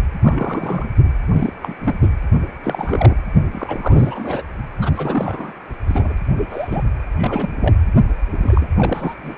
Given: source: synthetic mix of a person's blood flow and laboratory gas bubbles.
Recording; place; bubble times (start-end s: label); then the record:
Doppler ultrasound of blood flow; precordium
0.22-0.85 s: bubbles
1.03-1.10 s: bubbles
1.32-1.53 s: bubbles
1.62-1.74 s: bubbles
1.81-2.12 s: bubbles
2.63-3.15 s: bubbles
3.52-4.42 s: bubbles
4.80-5.52 s: bubbles
5.87-6.14 s: bubbles
6.38-6.46 s: bubbles
6.49-6.81 s: bubbles
7.17-7.75 s: bubbles
8.41-8.68 s: bubbles
8.76-9.15 s: bubbles
9.23-9.36 s: bubbles
From the record:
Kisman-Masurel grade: 342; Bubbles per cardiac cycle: rolling drumbeat, 9 or more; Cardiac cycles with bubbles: 100%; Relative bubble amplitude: moderate (0.250 to 0.450); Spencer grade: 3 (all of the cardiac periods contain showers or single bubble signals, but not dominating or overriding the cardiac motion signals); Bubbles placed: anywhere in the cardiac cycle